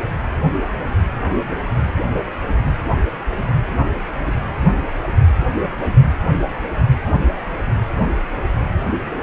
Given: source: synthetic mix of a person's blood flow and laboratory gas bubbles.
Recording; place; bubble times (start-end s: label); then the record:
Doppler ultrasound of blood flow; precordium
no bubbles
From the record:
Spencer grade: 0 (complete lack of bubble signals)